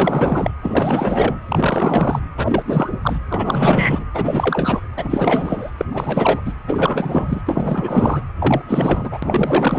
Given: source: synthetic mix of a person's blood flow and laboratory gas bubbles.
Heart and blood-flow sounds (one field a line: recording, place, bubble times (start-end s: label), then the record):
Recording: Doppler ultrasound of blood flow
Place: precordium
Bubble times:
0.00-0.53 s: bubbles
0.62-1.40 s: bubbles
1.47-2.19 s: bubbles
2.37-2.98 s: bubbles
3.02-3.19 s: bubbles
3.29-4.06 s: bubbles
4.14-4.88 s: bubbles
4.97-5.71 s: bubbles
5.78-5.85 s: bubbles
5.92-6.41 s: bubbles
6.45-6.54 s: bubbles
6.67-7.42 s: bubbles
7.47-8.25 s: bubbles
8.38-8.62 s: bubbles
8.68-9.19 s: bubbles
9.22-9.79 s: bubbles
From the record:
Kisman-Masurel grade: 444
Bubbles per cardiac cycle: continuous sound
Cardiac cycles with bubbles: 100%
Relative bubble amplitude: maximal (0.775 to 0.999)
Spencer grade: 4 (maximum detectable bubble signal sounding continuously throughout systole and diastole of every cardiac period, and overriding the amplitude of the normal cardiac signals)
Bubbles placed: anywhere in the cardiac cycle